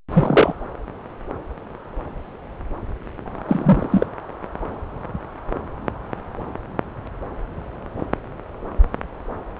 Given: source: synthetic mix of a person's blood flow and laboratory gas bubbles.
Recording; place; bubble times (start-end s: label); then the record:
Doppler ultrasound of blood flow; subclavian vein
0.13-0.54 s: bubbles
3.48-4.07 s: bubbles
From the record:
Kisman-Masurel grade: 123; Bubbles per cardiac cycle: 1 to 2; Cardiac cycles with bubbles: 10 to 50%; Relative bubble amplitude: loud (0.450 to 0.775); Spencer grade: 2 (many but less than half of the cardiac periods contain bubble signals, singularly or in groups); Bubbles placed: anywhere in the cardiac cycle